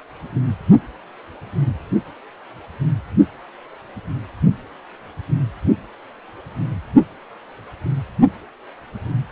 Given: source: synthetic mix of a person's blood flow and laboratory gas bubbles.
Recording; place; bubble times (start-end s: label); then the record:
Doppler ultrasound of blood flow; precordium
no bubbles
From the record:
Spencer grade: 0 (complete lack of bubble signals)